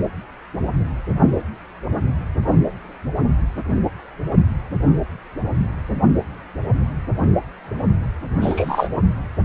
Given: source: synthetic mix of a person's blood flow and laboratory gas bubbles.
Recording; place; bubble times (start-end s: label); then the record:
Doppler ultrasound of blood flow; precordium
8.41-8.88 s: bubbles
From the record:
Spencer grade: 1 (occasional bubble signal discernible with the cardiac motion signal, with majority of cardiac periods free of bubbles); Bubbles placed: only in the low amplitude regions of the cardiac cycle